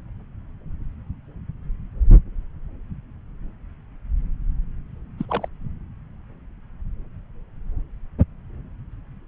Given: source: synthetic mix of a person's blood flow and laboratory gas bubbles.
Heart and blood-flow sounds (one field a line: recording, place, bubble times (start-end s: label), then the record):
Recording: Doppler ultrasound of blood flow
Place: subclavian vein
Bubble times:
5.17-5.25 s: bubbles
5.29-5.48 s: bubbles
From the record:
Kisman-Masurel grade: 211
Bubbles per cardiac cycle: several, 3 to 8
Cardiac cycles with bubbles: 1 to 10%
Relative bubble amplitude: barely perceptible (0.100 to 0.250)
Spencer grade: 1 (occasional bubble signal discernible with the cardiac motion signal, with majority of cardiac periods free of bubbles)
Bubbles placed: anywhere in the cardiac cycle